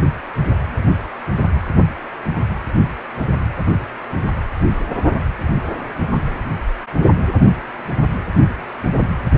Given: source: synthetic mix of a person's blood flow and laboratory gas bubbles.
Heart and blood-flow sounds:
Doppler ultrasound of blood flow; precordium
no bubbles
From the record:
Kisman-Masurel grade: 000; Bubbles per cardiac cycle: 0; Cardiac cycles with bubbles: 0%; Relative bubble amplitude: no bubbles discernible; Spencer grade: 0 (complete lack of bubble signals)

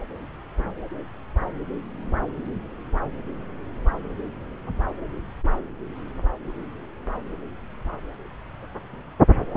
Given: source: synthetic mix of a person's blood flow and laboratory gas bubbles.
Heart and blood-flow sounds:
Doppler ultrasound of blood flow; subclavian vein
no bubbles
From the record:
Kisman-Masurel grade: 000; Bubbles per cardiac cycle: 0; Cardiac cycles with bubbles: 0%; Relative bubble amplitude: no bubbles discernible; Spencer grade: 0 (complete lack of bubble signals)

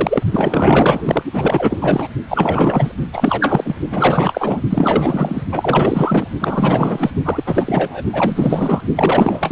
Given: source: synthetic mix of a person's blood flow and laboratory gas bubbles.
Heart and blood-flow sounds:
Doppler ultrasound of blood flow; precordium
0.00-0.23 s: bubbles
0.31-1.23 s: bubbles
1.33-2.07 s: bubbles
2.28-2.92 s: bubbles
3.13-3.75 s: bubbles
3.89-4.62 s: bubbles
4.70-5.43 s: bubbles
5.51-6.27 s: bubbles
6.40-7.10 s: bubbles
7.25-8.03 s: bubbles
8.12-8.80 s: bubbles
8.96-9.52 s: bubbles
From the record:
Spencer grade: 4 (maximum detectable bubble signal sounding continuously throughout systole and diastole of every cardiac period, and overriding the amplitude of the normal cardiac signals); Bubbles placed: only in the low amplitude regions of the cardiac cycle

